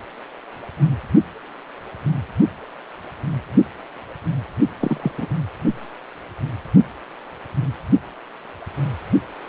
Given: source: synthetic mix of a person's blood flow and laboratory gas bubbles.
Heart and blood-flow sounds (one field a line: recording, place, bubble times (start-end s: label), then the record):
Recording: Doppler ultrasound of blood flow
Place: precordium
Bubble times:
4.79-5.11 s: bubbles
5.17-5.26 s: bubbles
From the record:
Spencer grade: 2 (many but less than half of the cardiac periods contain bubble signals, singularly or in groups)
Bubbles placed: only in the low amplitude regions of the cardiac cycle